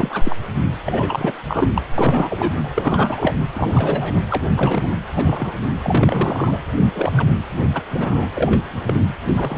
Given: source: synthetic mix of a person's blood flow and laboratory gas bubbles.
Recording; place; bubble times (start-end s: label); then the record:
Doppler ultrasound of blood flow; precordium
0.00-0.35 s: bubbles
0.86-1.32 s: bubbles
1.47-1.69 s: bubbles
1.74-1.82 s: bubbles
1.98-2.68 s: bubbles
2.75-3.33 s: bubbles
3.53-4.21 s: bubbles
4.29-4.43 s: bubbles
4.55-4.92 s: bubbles
5.13-5.77 s: bubbles
5.83-6.57 s: bubbles
6.78-6.88 s: bubbles
6.94-7.27 s: bubbles
7.74-7.83 s: bubbles
7.90-8.26 s: bubbles
8.35-8.62 s: bubbles
8.87-8.94 s: bubbles
9.28-9.58 s: bubbles
From the record:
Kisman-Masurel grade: 242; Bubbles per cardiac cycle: several, 3 to 8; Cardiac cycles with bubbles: 100%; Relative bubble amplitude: moderate (0.250 to 0.450); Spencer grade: 3 (all of the cardiac periods contain showers or single bubble signals, but not dominating or overriding the cardiac motion signals); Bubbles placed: anywhere in the cardiac cycle